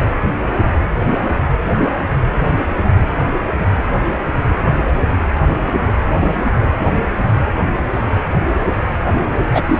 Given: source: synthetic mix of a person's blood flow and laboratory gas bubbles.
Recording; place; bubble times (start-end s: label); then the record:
Doppler ultrasound of blood flow; precordium
9.54-9.63 s: bubbles
9.67-9.78 s: bubbles
From the record:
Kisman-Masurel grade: 213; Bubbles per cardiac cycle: several, 3 to 8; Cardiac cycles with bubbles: 1 to 10%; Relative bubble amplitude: loud (0.450 to 0.775); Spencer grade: 1 (occasional bubble signal discernible with the cardiac motion signal, with majority of cardiac periods free of bubbles); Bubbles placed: anywhere in the cardiac cycle